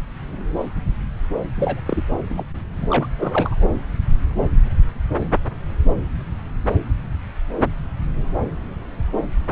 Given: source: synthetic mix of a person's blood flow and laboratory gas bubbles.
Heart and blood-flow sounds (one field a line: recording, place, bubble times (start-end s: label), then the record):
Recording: Doppler ultrasound of blood flow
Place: subclavian vein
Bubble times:
1.56-1.81 s: bubbles
1.85-2.02 s: bubbles
2.26-2.43 s: bubbles
2.81-2.87 s: bubbles
2.89-3.07 s: bubbles
3.19-3.66 s: bubbles
From the record:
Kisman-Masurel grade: 222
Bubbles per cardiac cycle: several, 3 to 8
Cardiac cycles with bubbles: 10 to 50%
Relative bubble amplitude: moderate (0.250 to 0.450)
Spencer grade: 2 (many but less than half of the cardiac periods contain bubble signals, singularly or in groups)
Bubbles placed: anywhere in the cardiac cycle